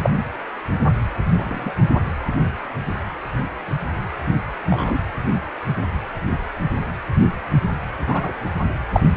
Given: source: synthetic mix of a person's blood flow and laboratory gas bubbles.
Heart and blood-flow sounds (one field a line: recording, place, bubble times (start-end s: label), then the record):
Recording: Doppler ultrasound of blood flow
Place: precordium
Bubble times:
0.03-0.10 s: bubbles
1.33-1.73 s: bubbles
4.68-4.98 s: bubbles
8.07-8.33 s: bubbles
8.94-9.04 s: bubbles
From the record:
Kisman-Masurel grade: 123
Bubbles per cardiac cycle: 1 to 2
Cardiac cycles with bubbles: 10 to 50%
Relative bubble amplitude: loud (0.450 to 0.775)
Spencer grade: 2 (many but less than half of the cardiac periods contain bubble signals, singularly or in groups)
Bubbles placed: anywhere in the cardiac cycle